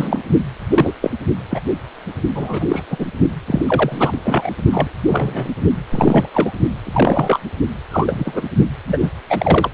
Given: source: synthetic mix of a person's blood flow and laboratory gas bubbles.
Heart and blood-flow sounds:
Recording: Doppler ultrasound of blood flow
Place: precordium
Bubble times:
0.00-0.19 s: bubbles
0.71-0.93 s: bubbles
1.02-1.10 s: bubbles
1.51-1.60 s: bubbles
2.35-2.84 s: bubbles
2.90-3.07 s: bubbles
3.48-3.64 s: bubbles
3.67-4.11 s: bubbles
4.24-4.50 s: bubbles
4.72-4.89 s: bubbles
5.07-5.49 s: bubbles
5.90-6.29 s: bubbles
6.34-6.51 s: bubbles
6.83-7.39 s: bubbles
7.90-8.42 s: bubbles
8.88-8.97 s: bubbles
9.00-9.10 s: bubbles
9.29-9.69 s: bubbles
From the record:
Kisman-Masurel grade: 243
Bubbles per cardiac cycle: several, 3 to 8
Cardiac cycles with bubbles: 100%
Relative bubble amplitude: loud (0.450 to 0.775)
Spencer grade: 3 (all of the cardiac periods contain showers or single bubble signals, but not dominating or overriding the cardiac motion signals)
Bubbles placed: only in the low amplitude regions of the cardiac cycle

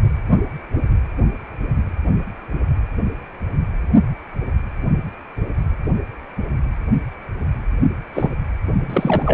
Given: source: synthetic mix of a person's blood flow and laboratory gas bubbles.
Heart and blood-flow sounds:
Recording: Doppler ultrasound of blood flow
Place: precordium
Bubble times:
8.14-8.29 s: bubbles
8.90-9.34 s: bubbles
From the record:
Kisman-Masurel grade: 222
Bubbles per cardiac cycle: several, 3 to 8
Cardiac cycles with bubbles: 10 to 50%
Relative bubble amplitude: moderate (0.250 to 0.450)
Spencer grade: 2 (many but less than half of the cardiac periods contain bubble signals, singularly or in groups)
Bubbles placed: only in the low amplitude regions of the cardiac cycle

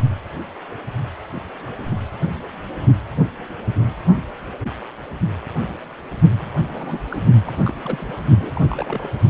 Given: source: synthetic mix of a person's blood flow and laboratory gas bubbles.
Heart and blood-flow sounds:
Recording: Doppler ultrasound of blood flow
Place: precordium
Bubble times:
6.39-6.46 s: bubbles
6.71-7.22 s: bubbles
7.43-7.75 s: bubbles
7.82-8.16 s: bubbles
8.38-9.09 s: bubbles
From the record:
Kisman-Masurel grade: 221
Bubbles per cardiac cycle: several, 3 to 8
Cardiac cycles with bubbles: 10 to 50%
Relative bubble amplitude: barely perceptible (0.100 to 0.250)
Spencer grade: 2 (many but less than half of the cardiac periods contain bubble signals, singularly or in groups)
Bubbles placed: only in the low amplitude regions of the cardiac cycle

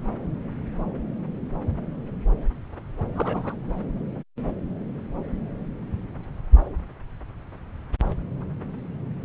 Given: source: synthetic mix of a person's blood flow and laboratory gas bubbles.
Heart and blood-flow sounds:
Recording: Doppler ultrasound of blood flow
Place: subclavian vein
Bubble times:
3.13-3.56 s: bubbles
From the record:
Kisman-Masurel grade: 212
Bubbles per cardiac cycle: several, 3 to 8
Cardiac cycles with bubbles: 1 to 10%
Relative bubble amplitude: moderate (0.250 to 0.450)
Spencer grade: 1 (occasional bubble signal discernible with the cardiac motion signal, with majority of cardiac periods free of bubbles)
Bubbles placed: anywhere in the cardiac cycle

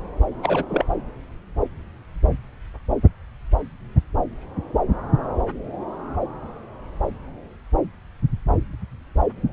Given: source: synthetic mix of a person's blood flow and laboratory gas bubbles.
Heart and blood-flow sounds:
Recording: Doppler ultrasound of blood flow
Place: subclavian vein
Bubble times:
0.43-0.65 s: bubbles
0.69-0.84 s: bubbles
From the record:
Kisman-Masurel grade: 212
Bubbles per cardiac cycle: several, 3 to 8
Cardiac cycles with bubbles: 1 to 10%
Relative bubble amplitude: moderate (0.250 to 0.450)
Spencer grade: 1 (occasional bubble signal discernible with the cardiac motion signal, with majority of cardiac periods free of bubbles)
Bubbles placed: anywhere in the cardiac cycle

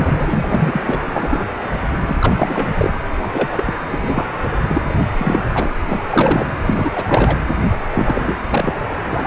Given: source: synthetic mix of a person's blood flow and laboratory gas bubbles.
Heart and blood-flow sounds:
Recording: Doppler ultrasound of blood flow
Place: precordium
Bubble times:
0.00-0.81 s: bubbles
0.87-0.99 s: bubbles
1.05-1.45 s: bubbles
1.91-2.71 s: bubbles
2.74-2.94 s: bubbles
3.21-3.27 s: bubbles
3.33-3.48 s: bubbles
3.51-3.63 s: bubbles
3.66-3.73 s: bubbles
3.88-4.27 s: bubbles
4.41-4.50 s: bubbles
4.68-4.81 s: bubbles
4.89-4.94 s: bubbles
5.18-5.49 s: bubbles
5.54-5.69 s: bubbles
5.87-6.03 s: bubbles
6.10-6.48 s: bubbles
6.65-7.04 s: bubbles
7.08-7.38 s: bubbles
7.71-7.76 s: bubbles
7.95-8.37 s: bubbles
8.50-8.78 s: bubbles
9.12-9.27 s: bubbles
From the record:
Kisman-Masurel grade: 343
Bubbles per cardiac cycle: rolling drumbeat, 9 or more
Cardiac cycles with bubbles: 100%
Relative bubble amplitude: loud (0.450 to 0.775)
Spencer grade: 3 (all of the cardiac periods contain showers or single bubble signals, but not dominating or overriding the cardiac motion signals)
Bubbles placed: anywhere in the cardiac cycle

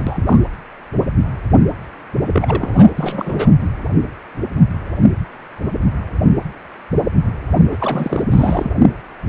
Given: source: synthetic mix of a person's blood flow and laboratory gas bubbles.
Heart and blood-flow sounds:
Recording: Doppler ultrasound of blood flow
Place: precordium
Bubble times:
0.00-0.04 s: bubbles
0.07-0.42 s: bubbles
2.32-2.91 s: bubbles
2.96-3.51 s: bubbles
7.71-8.23 s: bubbles
8.30-8.72 s: bubbles
From the record:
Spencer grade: 2 (many but less than half of the cardiac periods contain bubble signals, singularly or in groups)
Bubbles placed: anywhere in the cardiac cycle

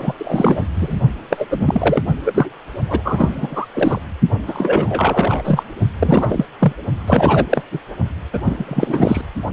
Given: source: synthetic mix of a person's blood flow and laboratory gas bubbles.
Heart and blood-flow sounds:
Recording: Doppler ultrasound of blood flow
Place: precordium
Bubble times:
0.00-0.13 s: bubbles
0.18-0.63 s: bubbles
0.76-1.01 s: bubbles
1.30-1.46 s: bubbles
1.50-2.02 s: bubbles
2.06-2.12 s: bubbles
2.25-2.50 s: bubbles
2.89-3.02 s: bubbles
3.04-3.67 s: bubbles
3.74-4.01 s: bubbles
4.47-5.63 s: bubbles
6.00-6.45 s: bubbles
6.60-6.73 s: bubbles
7.06-7.63 s: bubbles
7.71-7.79 s: bubbles
8.33-8.39 s: bubbles
8.44-9.21 s: bubbles
From the record:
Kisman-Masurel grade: 343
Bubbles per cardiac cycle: rolling drumbeat, 9 or more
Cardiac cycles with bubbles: 100%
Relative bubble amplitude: loud (0.450 to 0.775)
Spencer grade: 3 (all of the cardiac periods contain showers or single bubble signals, but not dominating or overriding the cardiac motion signals)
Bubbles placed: only in the low amplitude regions of the cardiac cycle

